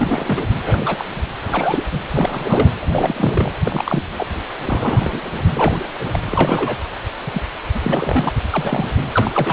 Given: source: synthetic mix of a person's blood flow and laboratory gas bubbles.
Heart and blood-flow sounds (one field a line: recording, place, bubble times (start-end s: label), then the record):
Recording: Doppler ultrasound of blood flow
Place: precordium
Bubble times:
0.00-0.46 s: bubbles
0.62-1.08 s: bubbles
1.43-1.83 s: bubbles
1.93-1.99 s: bubbles
2.14-2.72 s: bubbles
2.81-3.52 s: bubbles
3.64-4.04 s: bubbles
4.18-4.25 s: bubbles
4.65-5.32 s: bubbles
5.54-5.79 s: bubbles
6.13-6.19 s: bubbles
6.27-6.77 s: bubbles
7.27-7.43 s: bubbles
7.75-7.79 s: bubbles
7.82-8.33 s: bubbles
8.52-8.89 s: bubbles
9.15-9.31 s: bubbles
9.34-9.53 s: bubbles
From the record:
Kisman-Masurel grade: 242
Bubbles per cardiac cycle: several, 3 to 8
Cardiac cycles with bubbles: 100%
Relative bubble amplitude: moderate (0.250 to 0.450)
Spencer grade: 3 (all of the cardiac periods contain showers or single bubble signals, but not dominating or overriding the cardiac motion signals)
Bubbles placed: anywhere in the cardiac cycle